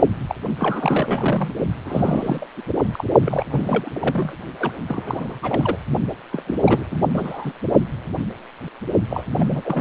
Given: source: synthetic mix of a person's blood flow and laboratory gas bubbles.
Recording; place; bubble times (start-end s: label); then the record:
Doppler ultrasound of blood flow; precordium
0.29-0.34 s: bubbles
0.59-1.51 s: bubbles
1.85-2.47 s: bubbles
2.56-2.61 s: bubbles
2.92-3.04 s: bubbles
3.21-3.44 s: bubbles
3.50-3.89 s: bubbles
3.93-4.38 s: bubbles
4.59-4.72 s: bubbles
4.88-5.39 s: bubbles
5.42-5.76 s: bubbles
6.33-6.42 s: bubbles
6.46-6.54 s: bubbles
6.65-6.84 s: bubbles
6.91-6.96 s: bubbles
7.14-7.53 s: bubbles
9.10-9.24 s: bubbles
9.38-9.81 s: bubbles
From the record:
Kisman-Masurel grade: 332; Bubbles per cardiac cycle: rolling drumbeat, 9 or more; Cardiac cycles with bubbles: 50 to 99%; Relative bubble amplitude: moderate (0.250 to 0.450); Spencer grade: 3 (all of the cardiac periods contain showers or single bubble signals, but not dominating or overriding the cardiac motion signals); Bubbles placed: only in the low amplitude regions of the cardiac cycle